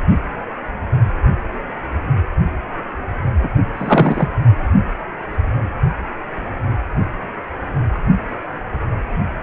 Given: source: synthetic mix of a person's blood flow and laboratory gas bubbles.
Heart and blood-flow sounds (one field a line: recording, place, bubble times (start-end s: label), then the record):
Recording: Doppler ultrasound of blood flow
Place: precordium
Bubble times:
3.43-3.49 s: bubbles
3.73-4.29 s: bubbles
From the record:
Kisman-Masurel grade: 213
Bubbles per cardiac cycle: several, 3 to 8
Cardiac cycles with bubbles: 1 to 10%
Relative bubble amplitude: loud (0.450 to 0.775)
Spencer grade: 1 (occasional bubble signal discernible with the cardiac motion signal, with majority of cardiac periods free of bubbles)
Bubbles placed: anywhere in the cardiac cycle